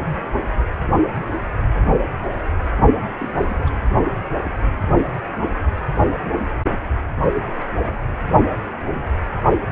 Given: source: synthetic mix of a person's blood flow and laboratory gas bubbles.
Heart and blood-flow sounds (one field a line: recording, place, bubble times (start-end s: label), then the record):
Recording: Doppler ultrasound of blood flow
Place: precordium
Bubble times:
3.19-3.71 s: bubbles
From the record:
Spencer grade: 1 (occasional bubble signal discernible with the cardiac motion signal, with majority of cardiac periods free of bubbles)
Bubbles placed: only in the low amplitude regions of the cardiac cycle